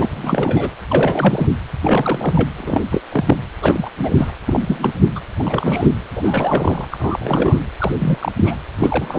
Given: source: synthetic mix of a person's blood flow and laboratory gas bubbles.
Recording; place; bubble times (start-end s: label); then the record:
Doppler ultrasound of blood flow; precordium
0.00-0.70 s: bubbles
0.90-1.47 s: bubbles
1.81-2.49 s: bubbles
2.58-2.84 s: bubbles
2.92-3.02 s: bubbles
3.11-3.36 s: bubbles
3.61-3.89 s: bubbles
3.99-4.31 s: bubbles
4.47-5.01 s: bubbles
5.15-5.20 s: bubbles
5.38-5.89 s: bubbles
6.16-6.85 s: bubbles
6.91-7.59 s: bubbles
7.79-8.32 s: bubbles
8.37-8.56 s: bubbles
8.78-9.19 s: bubbles
From the record:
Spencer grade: 3 (all of the cardiac periods contain showers or single bubble signals, but not dominating or overriding the cardiac motion signals); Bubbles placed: anywhere in the cardiac cycle